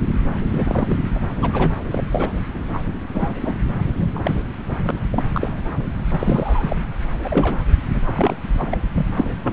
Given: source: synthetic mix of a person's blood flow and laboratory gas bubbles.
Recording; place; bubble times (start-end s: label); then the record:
Doppler ultrasound of blood flow; subclavian vein
0.49-0.97 s: bubbles
1.15-1.19 s: bubbles
1.40-1.73 s: bubbles
1.91-2.04 s: bubbles
2.12-2.29 s: bubbles
2.73-2.79 s: bubbles
3.14-3.35 s: bubbles
3.41-3.55 s: bubbles
3.96-4.08 s: bubbles
4.15-4.21 s: bubbles
4.23-4.45 s: bubbles
4.82-4.99 s: bubbles
5.12-5.62 s: bubbles
6.10-6.76 s: bubbles
7.24-7.65 s: bubbles
7.90-8.00 s: bubbles
8.04-8.35 s: bubbles
8.58-8.78 s: bubbles
8.94-9.06 s: bubbles
9.16-9.30 s: bubbles
9.42-9.53 s: bubbles
From the record:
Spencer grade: 3 (all of the cardiac periods contain showers or single bubble signals, but not dominating or overriding the cardiac motion signals); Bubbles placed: anywhere in the cardiac cycle